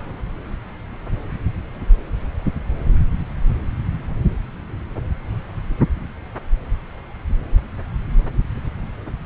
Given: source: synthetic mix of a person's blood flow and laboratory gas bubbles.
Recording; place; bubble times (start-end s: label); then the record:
Doppler ultrasound of blood flow; subclavian vein
no bubbles
From the record:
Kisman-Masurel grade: 000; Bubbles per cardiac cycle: 0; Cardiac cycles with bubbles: 0%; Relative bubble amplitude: no bubbles discernible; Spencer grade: 0 (complete lack of bubble signals)